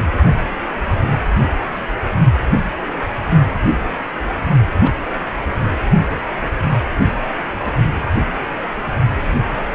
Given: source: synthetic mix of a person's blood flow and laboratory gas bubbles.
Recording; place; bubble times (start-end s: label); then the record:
Doppler ultrasound of blood flow; precordium
4.83-4.92 s: bubbles
6.99-7.06 s: bubbles
7.64-7.71 s: bubbles
From the record:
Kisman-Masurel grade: 122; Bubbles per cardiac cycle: 1 to 2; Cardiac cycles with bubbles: 10 to 50%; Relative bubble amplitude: moderate (0.250 to 0.450); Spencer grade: 2 (many but less than half of the cardiac periods contain bubble signals, singularly or in groups); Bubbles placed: only in the low amplitude regions of the cardiac cycle